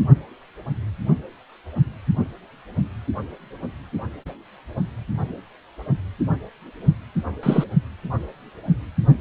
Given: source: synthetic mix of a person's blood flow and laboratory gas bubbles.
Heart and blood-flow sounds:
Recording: Doppler ultrasound of blood flow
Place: precordium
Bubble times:
7.43-7.64 s: bubbles
From the record:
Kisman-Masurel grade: 113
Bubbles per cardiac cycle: 1 to 2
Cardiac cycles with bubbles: 1 to 10%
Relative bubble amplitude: loud (0.450 to 0.775)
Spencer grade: 1 (occasional bubble signal discernible with the cardiac motion signal, with majority of cardiac periods free of bubbles)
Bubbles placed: only in the low amplitude regions of the cardiac cycle

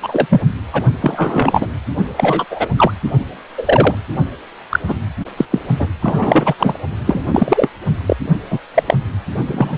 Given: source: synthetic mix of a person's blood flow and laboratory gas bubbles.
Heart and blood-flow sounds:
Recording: Doppler ultrasound of blood flow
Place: precordium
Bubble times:
0.02-0.42 s: bubbles
0.73-0.85 s: bubbles
1.02-1.67 s: bubbles
2.17-2.45 s: bubbles
2.50-2.69 s: bubbles
2.77-2.92 s: bubbles
3.58-3.95 s: bubbles
4.70-4.79 s: bubbles
4.87-4.95 s: bubbles
5.37-5.46 s: bubbles
5.50-5.58 s: bubbles
5.79-5.88 s: bubbles
6.01-6.54 s: bubbles
6.58-6.79 s: bubbles
7.07-7.26 s: bubbles
7.32-7.69 s: bubbles
8.06-8.16 s: bubbles
8.50-8.58 s: bubbles
8.74-8.83 s: bubbles
8.86-8.96 s: bubbles
9.46-9.77 s: bubbles
From the record:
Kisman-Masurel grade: 243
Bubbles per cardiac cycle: several, 3 to 8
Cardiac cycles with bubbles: 100%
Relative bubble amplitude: loud (0.450 to 0.775)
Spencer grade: 3 (all of the cardiac periods contain showers or single bubble signals, but not dominating or overriding the cardiac motion signals)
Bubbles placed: only in the low amplitude regions of the cardiac cycle

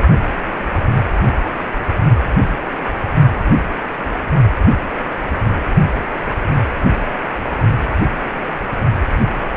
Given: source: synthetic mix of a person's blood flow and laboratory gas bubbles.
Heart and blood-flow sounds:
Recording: Doppler ultrasound of blood flow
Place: precordium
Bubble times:
no bubbles
From the record:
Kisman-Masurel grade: 000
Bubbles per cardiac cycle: 0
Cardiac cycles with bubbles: 0%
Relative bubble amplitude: no bubbles discernible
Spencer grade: 0 (complete lack of bubble signals)

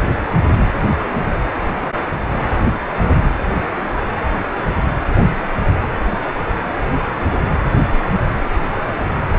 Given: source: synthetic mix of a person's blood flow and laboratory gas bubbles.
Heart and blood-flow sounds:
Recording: Doppler ultrasound of blood flow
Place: precordium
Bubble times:
no bubbles
From the record:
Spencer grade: 0 (complete lack of bubble signals)

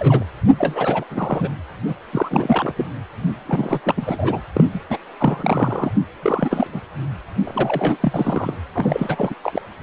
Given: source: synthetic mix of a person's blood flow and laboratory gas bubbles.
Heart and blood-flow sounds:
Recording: Doppler ultrasound of blood flow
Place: precordium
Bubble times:
0.00-0.23 s: bubbles
0.58-1.04 s: bubbles
1.10-1.48 s: bubbles
1.86-1.95 s: bubbles
2.12-2.73 s: bubbles
2.77-2.86 s: bubbles
3.46-3.81 s: bubbles
3.83-4.41 s: bubbles
4.53-4.64 s: bubbles
4.74-4.80 s: bubbles
4.89-4.97 s: bubbles
5.20-5.91 s: bubbles
6.22-6.82 s: bubbles
7.45-7.97 s: bubbles
8.01-8.54 s: bubbles
8.75-9.34 s: bubbles
9.44-9.62 s: bubbles
From the record:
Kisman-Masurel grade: 342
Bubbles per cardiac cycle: rolling drumbeat, 9 or more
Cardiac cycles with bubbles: 100%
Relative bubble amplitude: moderate (0.250 to 0.450)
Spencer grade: 3 (all of the cardiac periods contain showers or single bubble signals, but not dominating or overriding the cardiac motion signals)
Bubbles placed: anywhere in the cardiac cycle

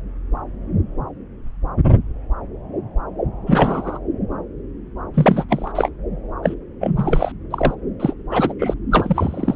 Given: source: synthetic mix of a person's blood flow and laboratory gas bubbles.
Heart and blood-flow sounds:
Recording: Doppler ultrasound of blood flow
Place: subclavian vein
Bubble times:
3.46-3.99 s: bubbles
5.14-5.45 s: bubbles
5.48-5.71 s: bubbles
5.75-5.89 s: bubbles
6.42-6.55 s: bubbles
6.80-7.32 s: bubbles
7.50-7.75 s: bubbles
7.99-8.14 s: bubbles
8.30-8.54 s: bubbles
8.59-8.74 s: bubbles
8.91-9.56 s: bubbles
From the record:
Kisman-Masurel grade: 233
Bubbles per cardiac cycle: several, 3 to 8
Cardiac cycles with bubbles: 50 to 99%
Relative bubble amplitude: loud (0.450 to 0.775)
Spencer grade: 3 (all of the cardiac periods contain showers or single bubble signals, but not dominating or overriding the cardiac motion signals)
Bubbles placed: anywhere in the cardiac cycle

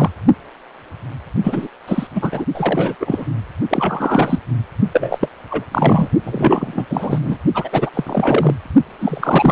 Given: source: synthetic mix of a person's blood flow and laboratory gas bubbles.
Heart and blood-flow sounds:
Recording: Doppler ultrasound of blood flow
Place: precordium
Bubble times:
0.00-0.10 s: bubbles
1.44-1.67 s: bubbles
1.88-2.07 s: bubbles
2.15-2.45 s: bubbles
2.54-2.95 s: bubbles
3.00-3.25 s: bubbles
3.71-4.39 s: bubbles
4.92-5.28 s: bubbles
5.49-5.65 s: bubbles
5.71-6.08 s: bubbles
6.24-6.86 s: bubbles
6.89-7.18 s: bubbles
7.21-7.36 s: bubbles
7.54-7.90 s: bubbles
7.93-8.54 s: bubbles
8.99-9.52 s: bubbles
From the record:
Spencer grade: 3 (all of the cardiac periods contain showers or single bubble signals, but not dominating or overriding the cardiac motion signals)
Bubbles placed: only in the low amplitude regions of the cardiac cycle

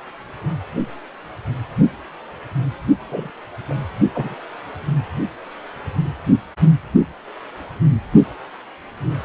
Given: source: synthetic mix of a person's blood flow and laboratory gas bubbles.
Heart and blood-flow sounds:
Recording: Doppler ultrasound of blood flow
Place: precordium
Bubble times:
3.09-3.30 s: bubbles
3.69-3.75 s: bubbles
4.13-4.35 s: bubbles
From the record:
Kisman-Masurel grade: 121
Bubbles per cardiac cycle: 1 to 2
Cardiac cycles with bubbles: 10 to 50%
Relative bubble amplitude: barely perceptible (0.100 to 0.250)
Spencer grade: 2 (many but less than half of the cardiac periods contain bubble signals, singularly or in groups)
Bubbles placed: only in the low amplitude regions of the cardiac cycle

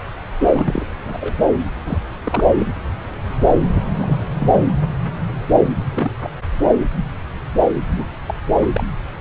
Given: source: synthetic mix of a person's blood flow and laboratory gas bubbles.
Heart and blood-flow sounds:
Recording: Doppler ultrasound of blood flow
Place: subclavian vein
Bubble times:
0.53-0.86 s: bubbles
1.04-1.33 s: bubbles
1.85-1.99 s: bubbles
2.24-2.44 s: bubbles
2.59-2.66 s: bubbles
3.75-3.82 s: bubbles
3.96-4.27 s: bubbles
4.38-4.54 s: bubbles
5.95-6.11 s: bubbles
6.23-6.28 s: bubbles
6.64-6.73 s: bubbles
7.96-8.06 s: bubbles
8.26-8.35 s: bubbles
8.74-8.87 s: bubbles
From the record:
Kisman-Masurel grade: 232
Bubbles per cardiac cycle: several, 3 to 8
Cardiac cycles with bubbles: 50 to 99%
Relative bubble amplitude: moderate (0.250 to 0.450)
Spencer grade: 3 (all of the cardiac periods contain showers or single bubble signals, but not dominating or overriding the cardiac motion signals)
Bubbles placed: anywhere in the cardiac cycle

